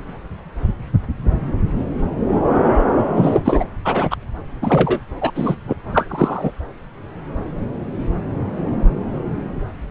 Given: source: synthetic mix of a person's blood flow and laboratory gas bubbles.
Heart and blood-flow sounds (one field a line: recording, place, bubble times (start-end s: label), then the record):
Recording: Doppler ultrasound of blood flow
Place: subclavian vein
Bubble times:
3.15-3.40 s: bubbles
3.45-3.64 s: bubbles
3.84-4.17 s: bubbles
4.62-5.00 s: bubbles
5.21-5.31 s: bubbles
5.35-5.55 s: bubbles
5.67-5.76 s: bubbles
5.93-6.52 s: bubbles
From the record:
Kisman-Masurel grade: 223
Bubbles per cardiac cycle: several, 3 to 8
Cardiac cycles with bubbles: 10 to 50%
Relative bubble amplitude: loud (0.450 to 0.775)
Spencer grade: 2 (many but less than half of the cardiac periods contain bubble signals, singularly or in groups)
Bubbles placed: anywhere in the cardiac cycle